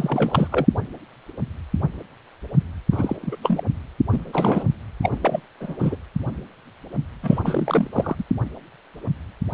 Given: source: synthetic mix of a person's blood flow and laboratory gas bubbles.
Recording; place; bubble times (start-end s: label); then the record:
Doppler ultrasound of blood flow; precordium
0.00-0.47 s: bubbles
0.52-0.66 s: bubbles
2.92-3.17 s: bubbles
3.22-3.37 s: bubbles
3.42-3.64 s: bubbles
4.11-4.67 s: bubbles
5.02-5.19 s: bubbles
5.22-5.40 s: bubbles
5.60-5.75 s: bubbles
5.78-5.96 s: bubbles
7.23-7.39 s: bubbles
7.42-7.87 s: bubbles
7.92-8.15 s: bubbles
8.18-8.23 s: bubbles
From the record:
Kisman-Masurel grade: 332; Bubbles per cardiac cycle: rolling drumbeat, 9 or more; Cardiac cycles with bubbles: 50 to 99%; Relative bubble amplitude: moderate (0.250 to 0.450); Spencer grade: 3 (all of the cardiac periods contain showers or single bubble signals, but not dominating or overriding the cardiac motion signals); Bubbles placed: anywhere in the cardiac cycle